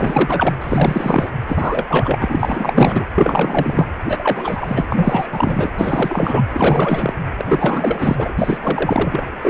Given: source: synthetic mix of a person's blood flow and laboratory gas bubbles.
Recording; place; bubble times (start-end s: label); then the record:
Doppler ultrasound of blood flow; precordium
0.00-0.54 s: bubbles
0.61-1.31 s: bubbles
1.47-2.36 s: bubbles
2.40-3.06 s: bubbles
3.15-3.89 s: bubbles
4.04-4.85 s: bubbles
4.89-5.27 s: bubbles
5.32-5.71 s: bubbles
5.78-6.45 s: bubbles
6.50-7.13 s: bubbles
7.38-8.32 s: bubbles
8.38-8.58 s: bubbles
8.62-9.27 s: bubbles
9.42-9.50 s: bubbles
From the record:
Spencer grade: 4 (maximum detectable bubble signal sounding continuously throughout systole and diastole of every cardiac period, and overriding the amplitude of the normal cardiac signals); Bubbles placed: anywhere in the cardiac cycle